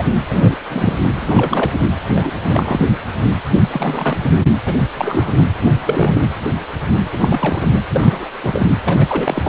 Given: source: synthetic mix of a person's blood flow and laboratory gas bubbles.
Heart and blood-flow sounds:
Doppler ultrasound of blood flow; precordium
0.00-0.04 s: bubbles
0.29-0.56 s: bubbles
0.69-0.97 s: bubbles
1.15-1.71 s: bubbles
2.15-2.31 s: bubbles
2.45-2.79 s: bubbles
3.72-4.30 s: bubbles
4.66-4.74 s: bubbles
4.97-5.33 s: bubbles
5.37-5.46 s: bubbles
5.86-6.21 s: bubbles
7.12-7.83 s: bubbles
7.94-8.25 s: bubbles
8.43-8.67 s: bubbles
8.84-9.49 s: bubbles
From the record:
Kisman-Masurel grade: 242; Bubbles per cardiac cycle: several, 3 to 8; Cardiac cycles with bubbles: 100%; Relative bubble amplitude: moderate (0.250 to 0.450); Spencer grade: 3 (all of the cardiac periods contain showers or single bubble signals, but not dominating or overriding the cardiac motion signals); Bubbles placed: anywhere in the cardiac cycle

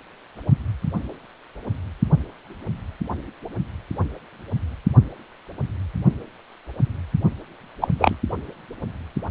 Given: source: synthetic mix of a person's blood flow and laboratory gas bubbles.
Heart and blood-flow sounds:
Doppler ultrasound of blood flow; precordium
7.81-7.88 s: bubbles
7.99-8.15 s: bubbles
From the record:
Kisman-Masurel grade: 113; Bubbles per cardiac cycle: 1 to 2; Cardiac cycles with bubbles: 1 to 10%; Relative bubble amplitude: loud (0.450 to 0.775); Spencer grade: 1 (occasional bubble signal discernible with the cardiac motion signal, with majority of cardiac periods free of bubbles); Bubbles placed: only in the low amplitude regions of the cardiac cycle

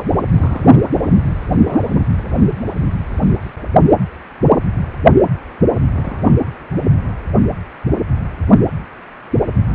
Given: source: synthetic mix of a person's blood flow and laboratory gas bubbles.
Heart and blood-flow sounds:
Doppler ultrasound of blood flow; precordium
0.33-0.84 s: bubbles
5.93-6.38 s: bubbles
From the record:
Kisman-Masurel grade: 211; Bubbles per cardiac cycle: several, 3 to 8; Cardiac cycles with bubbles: 1 to 10%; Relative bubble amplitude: barely perceptible (0.100 to 0.250); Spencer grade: 1 (occasional bubble signal discernible with the cardiac motion signal, with majority of cardiac periods free of bubbles); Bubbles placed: anywhere in the cardiac cycle

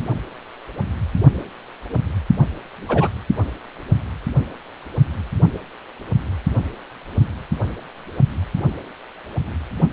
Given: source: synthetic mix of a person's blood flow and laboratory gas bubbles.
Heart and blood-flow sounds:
Doppler ultrasound of blood flow; precordium
2.89-3.08 s: bubbles
From the record:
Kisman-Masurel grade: 112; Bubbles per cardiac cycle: 1 to 2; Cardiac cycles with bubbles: 1 to 10%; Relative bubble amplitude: moderate (0.250 to 0.450); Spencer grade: 1 (occasional bubble signal discernible with the cardiac motion signal, with majority of cardiac periods free of bubbles); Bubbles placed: only in the low amplitude regions of the cardiac cycle

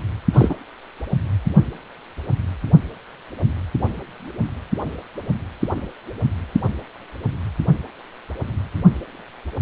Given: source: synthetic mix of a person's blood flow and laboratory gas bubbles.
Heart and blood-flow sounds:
Doppler ultrasound of blood flow; precordium
0.33-0.54 s: bubbles
From the record:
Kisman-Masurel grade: 223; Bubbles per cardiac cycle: several, 3 to 8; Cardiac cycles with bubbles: 10 to 50%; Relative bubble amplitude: loud (0.450 to 0.775); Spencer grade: 2 (many but less than half of the cardiac periods contain bubble signals, singularly or in groups); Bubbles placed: anywhere in the cardiac cycle

